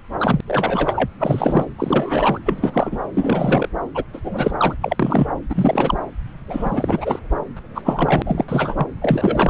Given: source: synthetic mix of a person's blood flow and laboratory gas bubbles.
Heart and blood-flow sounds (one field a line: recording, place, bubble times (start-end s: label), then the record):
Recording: Doppler ultrasound of blood flow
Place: subclavian vein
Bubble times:
0.19-0.41 s: bubbles
0.47-1.08 s: bubbles
1.19-1.65 s: bubbles
1.78-2.38 s: bubbles
2.46-2.98 s: bubbles
3.15-3.69 s: bubbles
3.94-4.04 s: bubbles
4.13-4.20 s: bubbles
4.24-4.52 s: bubbles
4.57-4.75 s: bubbles
4.82-4.96 s: bubbles
4.99-5.28 s: bubbles
5.49-5.95 s: bubbles
6.48-7.20 s: bubbles
7.57-7.60 s: bubbles
7.75-7.82 s: bubbles
7.85-8.22 s: bubbles
8.25-8.44 s: bubbles
8.48-8.87 s: bubbles
9.01-9.50 s: bubbles
From the record:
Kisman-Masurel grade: 342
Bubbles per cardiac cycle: rolling drumbeat, 9 or more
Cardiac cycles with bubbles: 100%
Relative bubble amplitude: moderate (0.250 to 0.450)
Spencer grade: 3 (all of the cardiac periods contain showers or single bubble signals, but not dominating or overriding the cardiac motion signals)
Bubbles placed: anywhere in the cardiac cycle